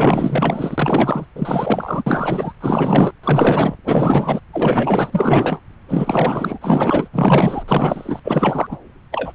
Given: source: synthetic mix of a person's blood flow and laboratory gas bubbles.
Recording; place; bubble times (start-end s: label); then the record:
Doppler ultrasound of blood flow; subclavian vein
0.00-1.26 s: bubbles
1.35-2.04 s: bubbles
2.06-2.53 s: bubbles
2.60-3.12 s: bubbles
3.23-3.76 s: bubbles
3.86-4.40 s: bubbles
4.53-5.60 s: bubbles
5.88-6.58 s: bubbles
6.61-7.08 s: bubbles
7.13-7.63 s: bubbles
7.68-8.19 s: bubbles
8.24-8.67 s: bubbles
8.71-8.77 s: bubbles
9.11-9.32 s: bubbles
From the record:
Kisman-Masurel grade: 444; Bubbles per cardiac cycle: continuous sound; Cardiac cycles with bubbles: 100%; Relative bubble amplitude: maximal (0.775 to 0.999); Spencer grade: 4 (maximum detectable bubble signal sounding continuously throughout systole and diastole of every cardiac period, and overriding the amplitude of the normal cardiac signals); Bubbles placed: anywhere in the cardiac cycle